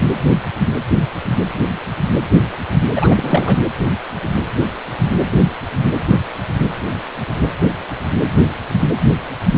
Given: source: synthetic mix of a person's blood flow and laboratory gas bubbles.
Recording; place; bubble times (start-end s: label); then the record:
Doppler ultrasound of blood flow; precordium
2.95-3.58 s: bubbles
From the record:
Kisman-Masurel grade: 213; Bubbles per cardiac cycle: several, 3 to 8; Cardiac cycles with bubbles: 1 to 10%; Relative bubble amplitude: loud (0.450 to 0.775); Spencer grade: 1 (occasional bubble signal discernible with the cardiac motion signal, with majority of cardiac periods free of bubbles); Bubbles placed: anywhere in the cardiac cycle